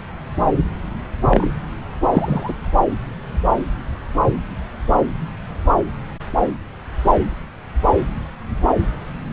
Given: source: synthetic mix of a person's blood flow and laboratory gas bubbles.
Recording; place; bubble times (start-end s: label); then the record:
Doppler ultrasound of blood flow; subclavian vein
1.31-1.51 s: bubbles
2.12-2.54 s: bubbles
From the record:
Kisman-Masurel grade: 123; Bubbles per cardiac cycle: 1 to 2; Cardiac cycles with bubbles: 10 to 50%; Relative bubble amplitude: loud (0.450 to 0.775); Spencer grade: 2 (many but less than half of the cardiac periods contain bubble signals, singularly or in groups); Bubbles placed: anywhere in the cardiac cycle